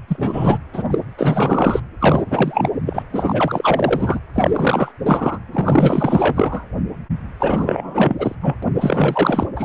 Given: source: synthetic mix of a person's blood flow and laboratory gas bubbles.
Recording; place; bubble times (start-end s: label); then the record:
Doppler ultrasound of blood flow; precordium
0.08-0.58 s: bubbles
0.73-0.83 s: bubbles
0.90-0.99 s: bubbles
1.18-1.80 s: bubbles
1.99-2.22 s: bubbles
2.26-2.69 s: bubbles
2.86-3.03 s: bubbles
3.13-4.19 s: bubbles
4.33-4.92 s: bubbles
5.05-5.39 s: bubbles
5.52-6.65 s: bubbles
7.39-8.36 s: bubbles
8.41-8.56 s: bubbles
8.62-8.64 s: bubbles
8.75-9.47 s: bubbles
9.56-9.65 s: bubbles
From the record:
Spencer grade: 4 (maximum detectable bubble signal sounding continuously throughout systole and diastole of every cardiac period, and overriding the amplitude of the normal cardiac signals); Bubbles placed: anywhere in the cardiac cycle